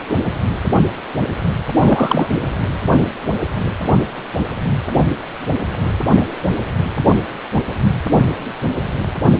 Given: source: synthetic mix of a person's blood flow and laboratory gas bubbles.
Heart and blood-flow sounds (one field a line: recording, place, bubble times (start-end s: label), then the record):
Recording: Doppler ultrasound of blood flow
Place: precordium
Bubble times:
1.80-2.28 s: bubbles
From the record:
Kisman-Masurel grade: 213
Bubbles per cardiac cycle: several, 3 to 8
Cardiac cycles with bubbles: 1 to 10%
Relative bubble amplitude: loud (0.450 to 0.775)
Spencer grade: 1 (occasional bubble signal discernible with the cardiac motion signal, with majority of cardiac periods free of bubbles)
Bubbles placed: anywhere in the cardiac cycle